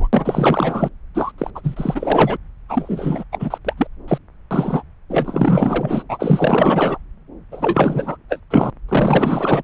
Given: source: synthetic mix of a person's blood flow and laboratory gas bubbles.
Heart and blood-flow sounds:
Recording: Doppler ultrasound of blood flow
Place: subclavian vein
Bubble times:
0.00-0.08 s: bubbles
0.12-0.89 s: bubbles
1.14-1.32 s: bubbles
1.38-1.50 s: bubbles
1.54-1.60 s: bubbles
1.63-2.38 s: bubbles
2.69-3.24 s: bubbles
3.32-3.58 s: bubbles
3.65-3.73 s: bubbles
3.77-3.87 s: bubbles
4.08-4.18 s: bubbles
4.51-4.83 s: bubbles
5.10-6.04 s: bubbles
6.08-6.99 s: bubbles
7.51-8.17 s: bubbles
8.29-8.40 s: bubbles
8.50-8.70 s: bubbles
8.88-9.62 s: bubbles
From the record:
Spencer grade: 4 (maximum detectable bubble signal sounding continuously throughout systole and diastole of every cardiac period, and overriding the amplitude of the normal cardiac signals)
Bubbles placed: anywhere in the cardiac cycle

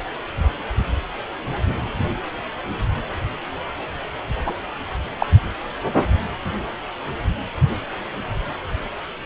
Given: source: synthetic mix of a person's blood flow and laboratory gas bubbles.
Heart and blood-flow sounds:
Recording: Doppler ultrasound of blood flow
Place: precordium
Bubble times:
4.46-4.54 s: bubbles
5.19-5.26 s: bubbles
From the record:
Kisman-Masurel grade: 113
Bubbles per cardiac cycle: 1 to 2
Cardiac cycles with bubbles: 1 to 10%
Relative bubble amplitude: loud (0.450 to 0.775)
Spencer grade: 1 (occasional bubble signal discernible with the cardiac motion signal, with majority of cardiac periods free of bubbles)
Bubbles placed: anywhere in the cardiac cycle

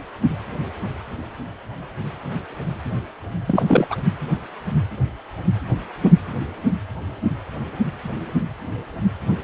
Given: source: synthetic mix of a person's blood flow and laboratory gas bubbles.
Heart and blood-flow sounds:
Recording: Doppler ultrasound of blood flow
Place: precordium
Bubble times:
3.47-3.96 s: bubbles
From the record:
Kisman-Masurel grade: 212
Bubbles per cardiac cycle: several, 3 to 8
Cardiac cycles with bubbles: 1 to 10%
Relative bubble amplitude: moderate (0.250 to 0.450)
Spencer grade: 1 (occasional bubble signal discernible with the cardiac motion signal, with majority of cardiac periods free of bubbles)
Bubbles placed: anywhere in the cardiac cycle

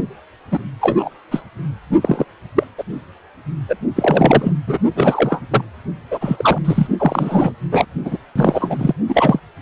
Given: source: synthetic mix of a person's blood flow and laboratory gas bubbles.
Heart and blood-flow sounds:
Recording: Doppler ultrasound of blood flow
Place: precordium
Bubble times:
0.51-0.59 s: bubbles
0.81-1.09 s: bubbles
1.31-1.43 s: bubbles
2.01-2.25 s: bubbles
2.55-2.64 s: bubbles
2.78-2.83 s: bubbles
3.68-3.76 s: bubbles
3.96-4.52 s: bubbles
4.67-4.78 s: bubbles
4.96-5.40 s: bubbles
5.50-5.64 s: bubbles
6.11-6.58 s: bubbles
6.64-6.88 s: bubbles
6.99-7.53 s: bubbles
7.71-7.86 s: bubbles
8.04-8.17 s: bubbles
8.36-8.94 s: bubbles
9.08-9.39 s: bubbles
From the record:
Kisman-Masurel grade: 243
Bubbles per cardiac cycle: several, 3 to 8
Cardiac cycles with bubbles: 100%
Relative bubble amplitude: loud (0.450 to 0.775)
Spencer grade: 3 (all of the cardiac periods contain showers or single bubble signals, but not dominating or overriding the cardiac motion signals)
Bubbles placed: only in the low amplitude regions of the cardiac cycle

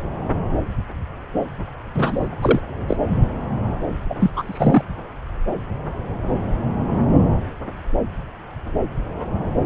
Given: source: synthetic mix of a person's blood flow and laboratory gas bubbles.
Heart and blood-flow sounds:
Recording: Doppler ultrasound of blood flow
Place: subclavian vein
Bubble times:
1.94-2.29 s: bubbles
2.42-2.60 s: bubbles
2.88-2.96 s: bubbles
4.09-4.14 s: bubbles
4.19-4.31 s: bubbles
4.34-4.83 s: bubbles
From the record:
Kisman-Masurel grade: 223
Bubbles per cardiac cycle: several, 3 to 8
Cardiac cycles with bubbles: 10 to 50%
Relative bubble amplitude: loud (0.450 to 0.775)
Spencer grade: 2 (many but less than half of the cardiac periods contain bubble signals, singularly or in groups)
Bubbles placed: anywhere in the cardiac cycle

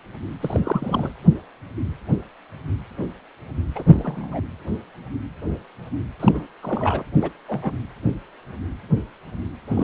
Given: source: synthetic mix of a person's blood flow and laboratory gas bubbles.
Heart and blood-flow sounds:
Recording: Doppler ultrasound of blood flow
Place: precordium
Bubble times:
0.40-1.12 s: bubbles
3.75-3.83 s: bubbles
3.86-4.40 s: bubbles
6.20-6.48 s: bubbles
6.62-7.05 s: bubbles
7.17-7.30 s: bubbles
7.48-7.73 s: bubbles
9.68-9.84 s: bubbles
From the record:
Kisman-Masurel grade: 222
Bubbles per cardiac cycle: several, 3 to 8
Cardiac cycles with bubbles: 10 to 50%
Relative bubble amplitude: moderate (0.250 to 0.450)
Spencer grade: 2 (many but less than half of the cardiac periods contain bubble signals, singularly or in groups)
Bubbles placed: anywhere in the cardiac cycle

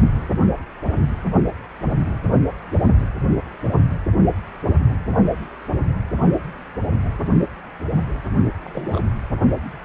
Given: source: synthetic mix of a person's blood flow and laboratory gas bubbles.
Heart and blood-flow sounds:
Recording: Doppler ultrasound of blood flow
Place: precordium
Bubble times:
8.64-9.00 s: bubbles
From the record:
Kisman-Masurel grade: 111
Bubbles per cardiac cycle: 1 to 2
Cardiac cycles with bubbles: 1 to 10%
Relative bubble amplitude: barely perceptible (0.100 to 0.250)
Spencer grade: 1 (occasional bubble signal discernible with the cardiac motion signal, with majority of cardiac periods free of bubbles)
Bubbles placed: only in the low amplitude regions of the cardiac cycle

